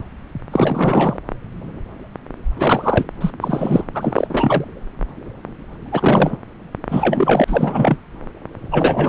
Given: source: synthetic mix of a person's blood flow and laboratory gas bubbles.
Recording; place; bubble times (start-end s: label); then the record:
Doppler ultrasound of blood flow; subclavian vein
0.52-1.17 s: bubbles
2.59-3.05 s: bubbles
3.21-3.30 s: bubbles
3.41-3.84 s: bubbles
3.94-4.64 s: bubbles
5.92-6.39 s: bubbles
6.89-7.45 s: bubbles
7.47-7.97 s: bubbles
8.71-9.09 s: bubbles
From the record:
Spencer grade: 3 (all of the cardiac periods contain showers or single bubble signals, but not dominating or overriding the cardiac motion signals); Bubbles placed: anywhere in the cardiac cycle